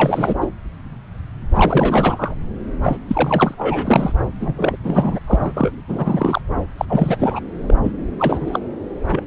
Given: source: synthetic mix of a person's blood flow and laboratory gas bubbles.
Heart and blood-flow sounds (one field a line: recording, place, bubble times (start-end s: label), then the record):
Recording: Doppler ultrasound of blood flow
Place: subclavian vein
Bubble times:
0.00-0.35 s: bubbles
0.41-0.47 s: bubbles
1.54-2.34 s: bubbles
2.83-2.97 s: bubbles
3.08-3.54 s: bubbles
3.58-4.13 s: bubbles
4.39-4.76 s: bubbles
4.83-5.19 s: bubbles
5.26-5.52 s: bubbles
5.55-5.71 s: bubbles
5.88-6.41 s: bubbles
6.76-6.85 s: bubbles
6.88-7.17 s: bubbles
7.19-7.40 s: bubbles
7.67-7.74 s: bubbles
7.84-7.92 s: bubbles
8.18-8.60 s: bubbles
9.11-9.23 s: bubbles
From the record:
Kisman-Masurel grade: 333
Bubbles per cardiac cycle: rolling drumbeat, 9 or more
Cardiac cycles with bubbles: 50 to 99%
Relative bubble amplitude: loud (0.450 to 0.775)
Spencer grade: 3 (all of the cardiac periods contain showers or single bubble signals, but not dominating or overriding the cardiac motion signals)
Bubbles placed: anywhere in the cardiac cycle